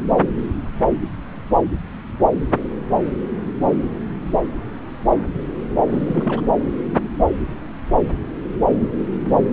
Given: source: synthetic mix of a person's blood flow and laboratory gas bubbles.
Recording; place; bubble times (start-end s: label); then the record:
Doppler ultrasound of blood flow; subclavian vein
5.90-6.41 s: bubbles
From the record:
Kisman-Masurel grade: 211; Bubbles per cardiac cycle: several, 3 to 8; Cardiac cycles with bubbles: 1 to 10%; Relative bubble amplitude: barely perceptible (0.100 to 0.250); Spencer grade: 1 (occasional bubble signal discernible with the cardiac motion signal, with majority of cardiac periods free of bubbles); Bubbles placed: anywhere in the cardiac cycle